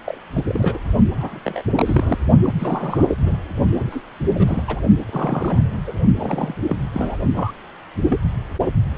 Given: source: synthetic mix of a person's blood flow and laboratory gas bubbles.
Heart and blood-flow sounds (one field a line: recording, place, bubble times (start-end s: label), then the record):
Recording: Doppler ultrasound of blood flow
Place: precordium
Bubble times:
0.06-0.18 s: bubbles
0.34-0.45 s: bubbles
0.47-0.78 s: bubbles
1.10-1.40 s: bubbles
1.45-1.61 s: bubbles
1.75-2.18 s: bubbles
2.42-2.53 s: bubbles
2.59-3.15 s: bubbles
3.21-3.37 s: bubbles
3.75-4.02 s: bubbles
4.34-4.63 s: bubbles
4.67-4.80 s: bubbles
5.08-5.78 s: bubbles
5.87-5.92 s: bubbles
6.15-6.54 s: bubbles
6.67-6.77 s: bubbles
6.94-7.17 s: bubbles
7.33-7.51 s: bubbles
8.09-8.18 s: bubbles
From the record:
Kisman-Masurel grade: 242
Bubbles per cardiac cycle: several, 3 to 8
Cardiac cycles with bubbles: 100%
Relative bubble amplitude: moderate (0.250 to 0.450)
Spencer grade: 3 (all of the cardiac periods contain showers or single bubble signals, but not dominating or overriding the cardiac motion signals)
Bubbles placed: only in the low amplitude regions of the cardiac cycle